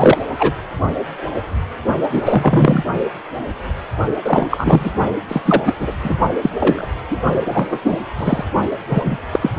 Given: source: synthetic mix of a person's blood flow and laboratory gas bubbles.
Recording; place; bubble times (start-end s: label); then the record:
Doppler ultrasound of blood flow; precordium
0.00-0.18 s: bubbles
0.39-0.53 s: bubbles
2.10-2.85 s: bubbles
4.25-4.92 s: bubbles
5.28-5.61 s: bubbles
5.66-5.73 s: bubbles
5.78-5.94 s: bubbles
6.03-6.14 s: bubbles
6.42-6.50 s: bubbles
6.59-6.88 s: bubbles
7.10-7.17 s: bubbles
7.44-7.78 s: bubbles
7.83-7.96 s: bubbles
8.17-8.45 s: bubbles
8.89-9.17 s: bubbles
9.32-9.50 s: bubbles
From the record:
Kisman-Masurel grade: 233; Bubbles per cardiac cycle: several, 3 to 8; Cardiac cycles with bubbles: 50 to 99%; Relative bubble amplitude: loud (0.450 to 0.775); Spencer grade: 3 (all of the cardiac periods contain showers or single bubble signals, but not dominating or overriding the cardiac motion signals); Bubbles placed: only in the low amplitude regions of the cardiac cycle